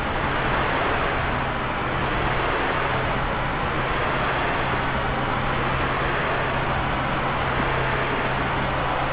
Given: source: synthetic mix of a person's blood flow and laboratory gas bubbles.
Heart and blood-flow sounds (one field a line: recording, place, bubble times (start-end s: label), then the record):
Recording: Doppler ultrasound of blood flow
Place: subclavian vein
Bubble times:
7.58-7.64 s: bubbles
From the record:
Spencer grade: 1 (occasional bubble signal discernible with the cardiac motion signal, with majority of cardiac periods free of bubbles)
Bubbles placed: anywhere in the cardiac cycle